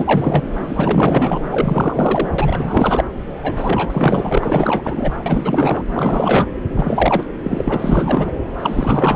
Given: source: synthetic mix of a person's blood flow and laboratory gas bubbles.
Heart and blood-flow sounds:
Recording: Doppler ultrasound of blood flow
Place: subclavian vein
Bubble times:
0.00-0.45 s: bubbles
0.65-1.39 s: bubbles
1.52-2.29 s: bubbles
2.38-3.04 s: bubbles
3.34-5.12 s: bubbles
5.25-5.83 s: bubbles
5.92-6.50 s: bubbles
6.74-7.26 s: bubbles
7.42-8.31 s: bubbles
8.60-9.16 s: bubbles
From the record:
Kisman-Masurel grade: 444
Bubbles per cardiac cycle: continuous sound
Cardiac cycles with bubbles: 100%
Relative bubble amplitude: maximal (0.775 to 0.999)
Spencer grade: 4 (maximum detectable bubble signal sounding continuously throughout systole and diastole of every cardiac period, and overriding the amplitude of the normal cardiac signals)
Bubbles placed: anywhere in the cardiac cycle

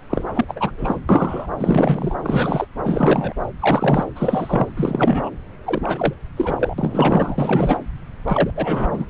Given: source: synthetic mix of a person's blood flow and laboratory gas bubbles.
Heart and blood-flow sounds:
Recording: Doppler ultrasound of blood flow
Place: subclavian vein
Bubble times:
0.10-0.24 s: bubbles
0.35-0.45 s: bubbles
0.48-0.71 s: bubbles
0.78-1.00 s: bubbles
1.09-1.49 s: bubbles
1.58-2.15 s: bubbles
2.23-2.66 s: bubbles
2.83-3.33 s: bubbles
3.59-4.05 s: bubbles
4.15-4.71 s: bubbles
4.76-5.29 s: bubbles
5.64-6.13 s: bubbles
6.36-6.74 s: bubbles
6.78-7.77 s: bubbles
8.28-8.51 s: bubbles
8.55-9.05 s: bubbles
From the record:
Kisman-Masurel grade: 343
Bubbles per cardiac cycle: rolling drumbeat, 9 or more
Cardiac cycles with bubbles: 100%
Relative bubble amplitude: loud (0.450 to 0.775)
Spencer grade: 3 (all of the cardiac periods contain showers or single bubble signals, but not dominating or overriding the cardiac motion signals)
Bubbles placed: anywhere in the cardiac cycle

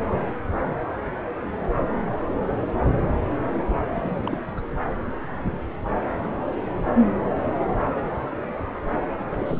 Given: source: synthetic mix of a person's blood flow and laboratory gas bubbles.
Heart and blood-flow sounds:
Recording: Doppler ultrasound of blood flow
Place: subclavian vein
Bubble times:
3.96-4.42 s: bubbles
4.55-4.61 s: bubbles
9.31-9.60 s: bubbles
From the record:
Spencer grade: 2 (many but less than half of the cardiac periods contain bubble signals, singularly or in groups)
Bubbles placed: anywhere in the cardiac cycle

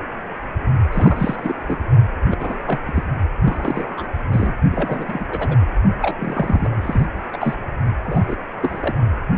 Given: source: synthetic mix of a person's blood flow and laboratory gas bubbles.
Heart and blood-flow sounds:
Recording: Doppler ultrasound of blood flow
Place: precordium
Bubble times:
0.91-1.90 s: bubbles
2.30-2.35 s: bubbles
2.39-2.56 s: bubbles
2.67-2.79 s: bubbles
2.88-3.03 s: bubbles
3.44-4.06 s: bubbles
4.32-4.54 s: bubbles
4.71-5.26 s: bubbles
5.30-5.56 s: bubbles
6.02-6.68 s: bubbles
6.81-7.06 s: bubbles
7.33-7.54 s: bubbles
8.04-8.36 s: bubbles
8.62-8.97 s: bubbles
From the record:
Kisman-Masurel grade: 232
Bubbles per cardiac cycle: several, 3 to 8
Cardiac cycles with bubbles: 50 to 99%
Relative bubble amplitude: moderate (0.250 to 0.450)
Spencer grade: 3 (all of the cardiac periods contain showers or single bubble signals, but not dominating or overriding the cardiac motion signals)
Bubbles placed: only in the low amplitude regions of the cardiac cycle

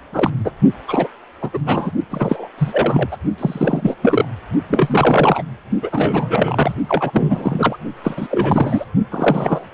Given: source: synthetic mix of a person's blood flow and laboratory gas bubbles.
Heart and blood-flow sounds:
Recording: Doppler ultrasound of blood flow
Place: precordium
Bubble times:
0.12-0.30 s: bubbles
0.45-0.51 s: bubbles
0.88-1.08 s: bubbles
1.41-1.58 s: bubbles
1.66-1.92 s: bubbles
2.09-2.48 s: bubbles
2.57-3.08 s: bubbles
3.11-3.17 s: bubbles
3.38-3.95 s: bubbles
4.02-4.25 s: bubbles
4.68-5.42 s: bubbles
5.82-6.74 s: bubbles
6.88-7.76 s: bubbles
8.04-8.27 s: bubbles
8.30-8.85 s: bubbles
9.11-9.69 s: bubbles
From the record:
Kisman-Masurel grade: 343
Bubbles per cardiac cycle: rolling drumbeat, 9 or more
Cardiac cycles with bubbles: 100%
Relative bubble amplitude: loud (0.450 to 0.775)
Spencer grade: 3 (all of the cardiac periods contain showers or single bubble signals, but not dominating or overriding the cardiac motion signals)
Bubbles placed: only in the low amplitude regions of the cardiac cycle

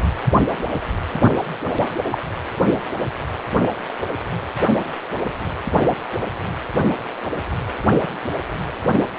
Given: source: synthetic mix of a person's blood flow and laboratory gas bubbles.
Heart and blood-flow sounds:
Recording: Doppler ultrasound of blood flow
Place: precordium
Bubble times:
2.11-2.19 s: bubbles
2.67-2.75 s: bubbles
From the record:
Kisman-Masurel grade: 113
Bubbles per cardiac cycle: 1 to 2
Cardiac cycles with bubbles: 1 to 10%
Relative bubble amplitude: loud (0.450 to 0.775)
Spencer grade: 1 (occasional bubble signal discernible with the cardiac motion signal, with majority of cardiac periods free of bubbles)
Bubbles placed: anywhere in the cardiac cycle

